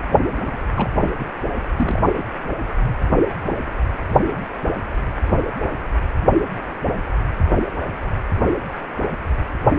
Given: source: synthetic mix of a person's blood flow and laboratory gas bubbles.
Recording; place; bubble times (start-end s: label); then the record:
Doppler ultrasound of blood flow; precordium
0.45-0.57 s: bubbles
0.76-0.89 s: bubbles
1.01-1.14 s: bubbles
1.19-1.25 s: bubbles
1.76-2.24 s: bubbles
From the record:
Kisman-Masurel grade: 211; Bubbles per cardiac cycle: several, 3 to 8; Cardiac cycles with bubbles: 1 to 10%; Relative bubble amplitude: barely perceptible (0.100 to 0.250); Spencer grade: 1 (occasional bubble signal discernible with the cardiac motion signal, with majority of cardiac periods free of bubbles); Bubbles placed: anywhere in the cardiac cycle